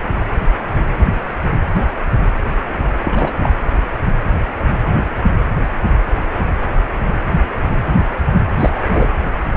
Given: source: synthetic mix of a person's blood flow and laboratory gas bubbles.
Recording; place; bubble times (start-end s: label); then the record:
Doppler ultrasound of blood flow; precordium
3.04-3.53 s: bubbles
8.57-8.84 s: bubbles
8.92-9.09 s: bubbles
From the record:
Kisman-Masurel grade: 212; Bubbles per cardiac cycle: several, 3 to 8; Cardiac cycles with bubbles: 1 to 10%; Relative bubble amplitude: moderate (0.250 to 0.450); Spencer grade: 1 (occasional bubble signal discernible with the cardiac motion signal, with majority of cardiac periods free of bubbles); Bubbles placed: anywhere in the cardiac cycle